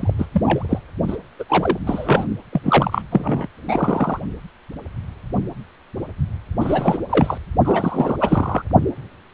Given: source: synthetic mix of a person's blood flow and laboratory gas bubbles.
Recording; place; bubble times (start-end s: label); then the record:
Doppler ultrasound of blood flow; precordium
0.00-0.13 s: bubbles
0.18-0.26 s: bubbles
0.34-0.41 s: bubbles
0.43-0.79 s: bubbles
1.07-1.17 s: bubbles
1.39-1.44 s: bubbles
1.48-1.78 s: bubbles
1.86-2.25 s: bubbles
2.52-3.02 s: bubbles
3.11-3.47 s: bubbles
3.67-4.20 s: bubbles
6.60-6.98 s: bubbles
7.09-7.38 s: bubbles
7.65-8.16 s: bubbles
8.20-8.62 s: bubbles
From the record:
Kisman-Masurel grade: 332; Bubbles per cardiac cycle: rolling drumbeat, 9 or more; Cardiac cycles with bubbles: 50 to 99%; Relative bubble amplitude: moderate (0.250 to 0.450); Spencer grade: 3 (all of the cardiac periods contain showers or single bubble signals, but not dominating or overriding the cardiac motion signals); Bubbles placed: only in the low amplitude regions of the cardiac cycle